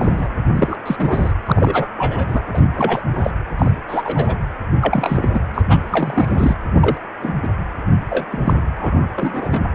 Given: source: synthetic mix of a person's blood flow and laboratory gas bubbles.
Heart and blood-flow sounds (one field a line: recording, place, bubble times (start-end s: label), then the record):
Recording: Doppler ultrasound of blood flow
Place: precordium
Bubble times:
0.00-0.29 s: bubbles
0.47-0.76 s: bubbles
0.85-0.96 s: bubbles
0.99-1.32 s: bubbles
1.46-1.88 s: bubbles
1.97-2.43 s: bubbles
2.53-2.61 s: bubbles
2.75-3.01 s: bubbles
3.15-3.30 s: bubbles
3.58-3.71 s: bubbles
3.88-4.36 s: bubbles
4.81-5.40 s: bubbles
5.54-5.62 s: bubbles
5.69-6.54 s: bubbles
6.79-6.98 s: bubbles
7.21-7.33 s: bubbles
7.42-7.48 s: bubbles
8.09-8.25 s: bubbles
8.31-8.61 s: bubbles
8.77-9.07 s: bubbles
9.15-9.66 s: bubbles
From the record:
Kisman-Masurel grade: 243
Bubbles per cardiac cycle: several, 3 to 8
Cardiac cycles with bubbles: 100%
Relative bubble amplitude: loud (0.450 to 0.775)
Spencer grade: 3 (all of the cardiac periods contain showers or single bubble signals, but not dominating or overriding the cardiac motion signals)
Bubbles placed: anywhere in the cardiac cycle